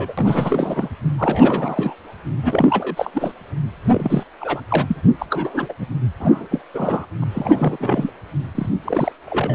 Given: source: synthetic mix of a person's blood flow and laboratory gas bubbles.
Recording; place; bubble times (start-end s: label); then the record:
Doppler ultrasound of blood flow; precordium
0.00-0.13 s: bubbles
0.17-0.89 s: bubbles
1.18-1.95 s: bubbles
2.42-3.10 s: bubbles
3.14-3.31 s: bubbles
3.83-4.25 s: bubbles
4.41-4.61 s: bubbles
4.69-5.01 s: bubbles
5.19-5.26 s: bubbles
5.30-5.74 s: bubbles
5.79-5.87 s: bubbles
6.20-6.47 s: bubbles
6.51-6.61 s: bubbles
6.74-7.06 s: bubbles
7.22-7.24 s: bubbles
7.29-8.10 s: bubbles
8.54-8.69 s: bubbles
8.84-9.12 s: bubbles
9.26-9.55 s: bubbles
From the record:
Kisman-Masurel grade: 342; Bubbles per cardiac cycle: rolling drumbeat, 9 or more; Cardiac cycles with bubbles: 100%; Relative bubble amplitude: moderate (0.250 to 0.450); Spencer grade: 3 (all of the cardiac periods contain showers or single bubble signals, but not dominating or overriding the cardiac motion signals); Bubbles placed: anywhere in the cardiac cycle